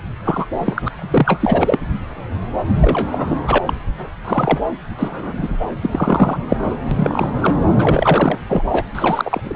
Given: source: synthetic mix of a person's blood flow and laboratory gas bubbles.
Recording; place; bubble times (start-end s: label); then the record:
Doppler ultrasound of blood flow; subclavian vein
0.24-0.46 s: bubbles
0.58-0.82 s: bubbles
0.85-0.89 s: bubbles
0.96-1.80 s: bubbles
2.81-3.40 s: bubbles
3.47-3.58 s: bubbles
3.65-3.73 s: bubbles
4.25-4.58 s: bubbles
4.99-5.58 s: bubbles
5.82-6.39 s: bubbles
6.49-6.75 s: bubbles
6.91-7.32 s: bubbles
7.42-7.54 s: bubbles
7.75-8.38 s: bubbles
8.48-8.62 s: bubbles
8.71-8.84 s: bubbles
8.95-9.41 s: bubbles
9.44-9.56 s: bubbles
From the record:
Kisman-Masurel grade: 243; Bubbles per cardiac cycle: several, 3 to 8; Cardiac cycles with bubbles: 100%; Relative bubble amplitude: loud (0.450 to 0.775); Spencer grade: 3 (all of the cardiac periods contain showers or single bubble signals, but not dominating or overriding the cardiac motion signals); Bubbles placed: anywhere in the cardiac cycle